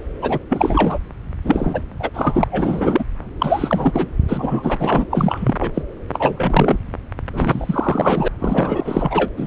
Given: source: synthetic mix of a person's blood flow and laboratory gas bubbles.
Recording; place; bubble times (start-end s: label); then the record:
Doppler ultrasound of blood flow; subclavian vein
0.21-0.40 s: bubbles
0.49-0.98 s: bubbles
1.44-1.82 s: bubbles
1.99-2.10 s: bubbles
2.14-2.44 s: bubbles
2.51-3.04 s: bubbles
3.40-4.08 s: bubbles
4.29-5.05 s: bubbles
5.10-5.71 s: bubbles
5.74-5.82 s: bubbles
6.13-6.80 s: bubbles
7.32-8.28 s: bubbles
8.38-9.29 s: bubbles
9.37-9.47 s: bubbles
From the record:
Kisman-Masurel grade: 343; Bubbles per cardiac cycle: rolling drumbeat, 9 or more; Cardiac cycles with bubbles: 100%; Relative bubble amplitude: loud (0.450 to 0.775); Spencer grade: 3 (all of the cardiac periods contain showers or single bubble signals, but not dominating or overriding the cardiac motion signals); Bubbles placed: anywhere in the cardiac cycle